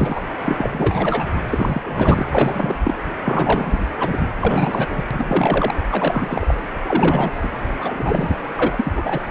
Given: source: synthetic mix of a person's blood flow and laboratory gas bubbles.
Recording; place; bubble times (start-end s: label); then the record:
Doppler ultrasound of blood flow; precordium
0.00-0.23 s: bubbles
0.40-1.25 s: bubbles
1.47-1.81 s: bubbles
1.84-2.23 s: bubbles
2.31-2.79 s: bubbles
2.83-2.94 s: bubbles
3.23-3.79 s: bubbles
3.99-4.16 s: bubbles
4.19-4.28 s: bubbles
4.36-5.04 s: bubbles
5.11-5.75 s: bubbles
5.91-6.54 s: bubbles
6.84-7.37 s: bubbles
7.42-7.47 s: bubbles
7.80-8.36 s: bubbles
8.55-9.20 s: bubbles
From the record:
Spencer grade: 3 (all of the cardiac periods contain showers or single bubble signals, but not dominating or overriding the cardiac motion signals); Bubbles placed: anywhere in the cardiac cycle